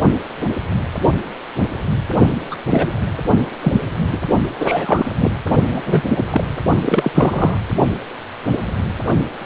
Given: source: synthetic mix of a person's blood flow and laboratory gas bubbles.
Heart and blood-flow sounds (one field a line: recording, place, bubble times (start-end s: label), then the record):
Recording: Doppler ultrasound of blood flow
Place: precordium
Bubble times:
2.50-2.55 s: bubbles
2.71-2.93 s: bubbles
3.62-3.79 s: bubbles
4.11-4.20 s: bubbles
4.59-5.12 s: bubbles
5.16-5.31 s: bubbles
5.71-5.79 s: bubbles
5.85-6.02 s: bubbles
6.09-6.25 s: bubbles
6.30-6.44 s: bubbles
6.81-7.11 s: bubbles
7.14-7.58 s: bubbles
From the record:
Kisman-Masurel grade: 233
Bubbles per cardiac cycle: several, 3 to 8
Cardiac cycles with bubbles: 50 to 99%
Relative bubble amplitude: loud (0.450 to 0.775)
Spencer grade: 3 (all of the cardiac periods contain showers or single bubble signals, but not dominating or overriding the cardiac motion signals)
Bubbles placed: only in the low amplitude regions of the cardiac cycle